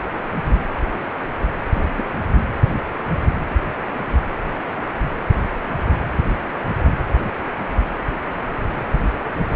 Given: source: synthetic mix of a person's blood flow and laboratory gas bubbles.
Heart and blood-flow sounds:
Doppler ultrasound of blood flow; precordium
1.74-2.04 s: bubbles
From the record:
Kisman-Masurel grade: 112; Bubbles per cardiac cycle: 1 to 2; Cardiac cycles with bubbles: 1 to 10%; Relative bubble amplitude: moderate (0.250 to 0.450); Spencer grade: 1 (occasional bubble signal discernible with the cardiac motion signal, with majority of cardiac periods free of bubbles); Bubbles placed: anywhere in the cardiac cycle

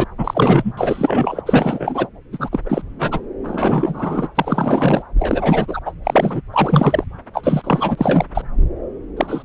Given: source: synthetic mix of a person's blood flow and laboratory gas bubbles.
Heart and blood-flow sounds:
Doppler ultrasound of blood flow; subclavian vein
0.00-0.04 s: bubbles
0.18-0.73 s: bubbles
0.77-1.42 s: bubbles
1.45-2.07 s: bubbles
2.32-2.49 s: bubbles
2.52-2.59 s: bubbles
2.65-2.81 s: bubbles
2.98-3.20 s: bubbles
3.44-4.27 s: bubbles
4.35-5.03 s: bubbles
5.19-5.79 s: bubbles
5.85-5.92 s: bubbles
6.04-6.41 s: bubbles
6.53-7.05 s: bubbles
7.33-8.25 s: bubbles
8.34-8.41 s: bubbles
9.16-9.45 s: bubbles
From the record:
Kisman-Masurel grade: 343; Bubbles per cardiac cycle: rolling drumbeat, 9 or more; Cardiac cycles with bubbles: 100%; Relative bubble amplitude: loud (0.450 to 0.775); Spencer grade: 3 (all of the cardiac periods contain showers or single bubble signals, but not dominating or overriding the cardiac motion signals); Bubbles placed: anywhere in the cardiac cycle

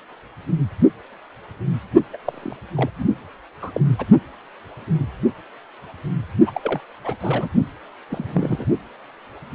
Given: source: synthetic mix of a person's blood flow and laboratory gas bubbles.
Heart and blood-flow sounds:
Doppler ultrasound of blood flow; precordium
2.13-2.17 s: bubbles
2.25-2.56 s: bubbles
2.75-2.90 s: bubbles
2.98-3.05 s: bubbles
3.62-3.70 s: bubbles
3.74-3.81 s: bubbles
3.98-4.06 s: bubbles
6.46-6.61 s: bubbles
6.63-6.81 s: bubbles
7.04-7.15 s: bubbles
7.20-7.48 s: bubbles
8.10-8.65 s: bubbles
From the record:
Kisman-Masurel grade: 221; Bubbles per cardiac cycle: several, 3 to 8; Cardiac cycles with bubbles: 10 to 50%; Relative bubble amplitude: barely perceptible (0.100 to 0.250); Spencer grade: 2 (many but less than half of the cardiac periods contain bubble signals, singularly or in groups); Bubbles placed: only in the low amplitude regions of the cardiac cycle

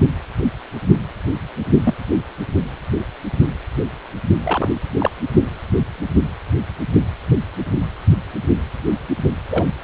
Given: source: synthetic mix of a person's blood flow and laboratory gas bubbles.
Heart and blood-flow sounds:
Doppler ultrasound of blood flow; precordium
1.83-1.94 s: bubbles
4.43-4.69 s: bubbles
5.00-5.10 s: bubbles
9.50-9.70 s: bubbles
From the record:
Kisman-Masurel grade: 122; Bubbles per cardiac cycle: 1 to 2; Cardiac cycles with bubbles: 10 to 50%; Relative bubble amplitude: moderate (0.250 to 0.450); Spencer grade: 2 (many but less than half of the cardiac periods contain bubble signals, singularly or in groups); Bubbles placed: only in the low amplitude regions of the cardiac cycle

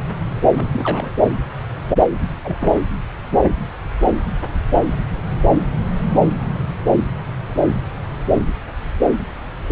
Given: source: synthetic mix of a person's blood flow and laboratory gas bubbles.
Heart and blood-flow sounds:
Doppler ultrasound of blood flow; subclavian vein
0.55-1.10 s: bubbles
2.11-2.20 s: bubbles
2.44-2.56 s: bubbles
2.60-2.73 s: bubbles
From the record:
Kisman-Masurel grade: 211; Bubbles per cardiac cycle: several, 3 to 8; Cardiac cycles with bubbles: 1 to 10%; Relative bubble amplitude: barely perceptible (0.100 to 0.250); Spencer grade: 1 (occasional bubble signal discernible with the cardiac motion signal, with majority of cardiac periods free of bubbles); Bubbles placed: anywhere in the cardiac cycle

